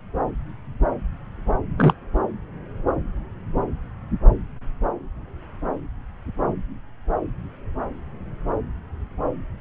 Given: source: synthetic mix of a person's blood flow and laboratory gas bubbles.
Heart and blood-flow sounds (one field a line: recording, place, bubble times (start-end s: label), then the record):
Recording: Doppler ultrasound of blood flow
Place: subclavian vein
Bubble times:
1.77-1.94 s: bubbles
From the record:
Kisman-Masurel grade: 212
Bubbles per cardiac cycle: several, 3 to 8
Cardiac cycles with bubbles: 1 to 10%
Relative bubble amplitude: moderate (0.250 to 0.450)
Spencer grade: 1 (occasional bubble signal discernible with the cardiac motion signal, with majority of cardiac periods free of bubbles)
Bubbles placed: anywhere in the cardiac cycle